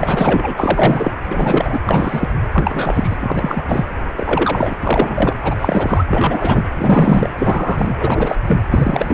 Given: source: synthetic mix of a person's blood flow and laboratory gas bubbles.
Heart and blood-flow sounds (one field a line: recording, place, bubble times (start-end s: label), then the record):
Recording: Doppler ultrasound of blood flow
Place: precordium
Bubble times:
0.00-1.12 s: bubbles
1.22-1.79 s: bubbles
1.85-2.29 s: bubbles
2.53-3.17 s: bubbles
3.20-3.62 s: bubbles
3.67-3.86 s: bubbles
4.17-4.76 s: bubbles
4.81-5.34 s: bubbles
5.42-6.04 s: bubbles
6.11-6.65 s: bubbles
6.75-7.28 s: bubbles
7.36-7.94 s: bubbles
7.99-8.36 s: bubbles
8.47-8.61 s: bubbles
8.70-9.14 s: bubbles
From the record:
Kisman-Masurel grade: 343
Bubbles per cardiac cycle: rolling drumbeat, 9 or more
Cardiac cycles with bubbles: 100%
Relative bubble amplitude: loud (0.450 to 0.775)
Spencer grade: 3 (all of the cardiac periods contain showers or single bubble signals, but not dominating or overriding the cardiac motion signals)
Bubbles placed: anywhere in the cardiac cycle